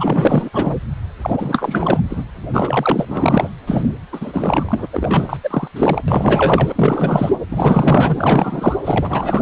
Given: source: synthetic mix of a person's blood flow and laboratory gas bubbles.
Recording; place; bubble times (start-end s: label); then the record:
Doppler ultrasound of blood flow; precordium
0.00-0.50 s: bubbles
0.53-0.80 s: bubbles
1.22-2.00 s: bubbles
2.09-2.24 s: bubbles
2.52-3.05 s: bubbles
3.08-3.49 s: bubbles
3.67-3.96 s: bubbles
4.12-4.87 s: bubbles
4.93-5.37 s: bubbles
5.43-5.68 s: bubbles
5.75-6.04 s: bubbles
6.08-6.72 s: bubbles
6.75-7.34 s: bubbles
7.50-8.77 s: bubbles
8.85-9.42 s: bubbles
From the record:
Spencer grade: 4 (maximum detectable bubble signal sounding continuously throughout systole and diastole of every cardiac period, and overriding the amplitude of the normal cardiac signals); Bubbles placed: anywhere in the cardiac cycle